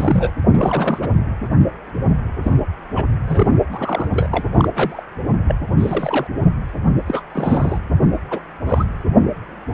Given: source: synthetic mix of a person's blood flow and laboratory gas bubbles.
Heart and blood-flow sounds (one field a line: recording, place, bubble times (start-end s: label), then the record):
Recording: Doppler ultrasound of blood flow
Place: precordium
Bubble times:
0.00-0.30 s: bubbles
0.53-1.09 s: bubbles
2.43-2.53 s: bubbles
2.95-3.06 s: bubbles
3.27-3.58 s: bubbles
3.74-4.45 s: bubbles
4.57-4.69 s: bubbles
4.74-5.03 s: bubbles
5.47-5.55 s: bubbles
5.78-6.27 s: bubbles
7.06-7.23 s: bubbles
7.33-7.79 s: bubbles
8.30-8.39 s: bubbles
8.66-8.85 s: bubbles
From the record:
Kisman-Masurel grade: 232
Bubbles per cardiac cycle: several, 3 to 8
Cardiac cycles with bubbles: 50 to 99%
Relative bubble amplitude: moderate (0.250 to 0.450)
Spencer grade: 3 (all of the cardiac periods contain showers or single bubble signals, but not dominating or overriding the cardiac motion signals)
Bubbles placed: anywhere in the cardiac cycle